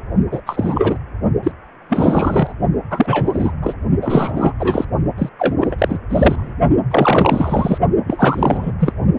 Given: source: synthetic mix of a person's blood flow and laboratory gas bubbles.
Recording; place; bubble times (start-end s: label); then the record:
Doppler ultrasound of blood flow; precordium
0.31-0.41 s: bubbles
0.46-0.98 s: bubbles
1.42-1.52 s: bubbles
1.90-2.54 s: bubbles
2.91-3.52 s: bubbles
3.62-3.73 s: bubbles
4.01-4.53 s: bubbles
4.59-4.84 s: bubbles
5.18-5.29 s: bubbles
5.39-5.56 s: bubbles
5.60-5.98 s: bubbles
6.09-6.53 s: bubbles
6.90-7.78 s: bubbles
8.06-8.72 s: bubbles
8.79-8.93 s: bubbles
From the record:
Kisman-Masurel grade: 333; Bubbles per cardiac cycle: rolling drumbeat, 9 or more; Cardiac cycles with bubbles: 50 to 99%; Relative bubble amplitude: loud (0.450 to 0.775); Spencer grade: 3 (all of the cardiac periods contain showers or single bubble signals, but not dominating or overriding the cardiac motion signals); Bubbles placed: only in the low amplitude regions of the cardiac cycle